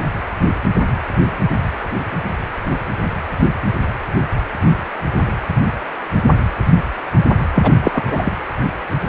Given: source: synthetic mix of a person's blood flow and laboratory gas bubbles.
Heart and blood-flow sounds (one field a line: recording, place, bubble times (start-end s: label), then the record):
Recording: Doppler ultrasound of blood flow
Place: precordium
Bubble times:
7.55-7.72 s: bubbles
7.82-8.04 s: bubbles
8.06-8.32 s: bubbles
From the record:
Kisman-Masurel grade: 213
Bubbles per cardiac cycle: several, 3 to 8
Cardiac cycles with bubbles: 1 to 10%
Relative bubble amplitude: loud (0.450 to 0.775)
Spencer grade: 1 (occasional bubble signal discernible with the cardiac motion signal, with majority of cardiac periods free of bubbles)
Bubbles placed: anywhere in the cardiac cycle